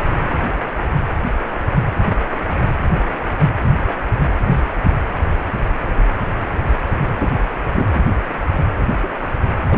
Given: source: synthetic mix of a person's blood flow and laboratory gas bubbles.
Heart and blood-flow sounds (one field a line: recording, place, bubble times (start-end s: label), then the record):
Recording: Doppler ultrasound of blood flow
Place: precordium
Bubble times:
0.00-0.02 s: bubbles
4.43-4.54 s: bubbles
7.18-7.32 s: bubbles
7.75-8.00 s: bubbles
9.02-9.09 s: bubbles
9.70-9.78 s: bubbles
From the record:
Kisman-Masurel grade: 122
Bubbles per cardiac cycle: 1 to 2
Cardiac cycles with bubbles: 10 to 50%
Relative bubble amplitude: moderate (0.250 to 0.450)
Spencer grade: 2 (many but less than half of the cardiac periods contain bubble signals, singularly or in groups)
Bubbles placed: anywhere in the cardiac cycle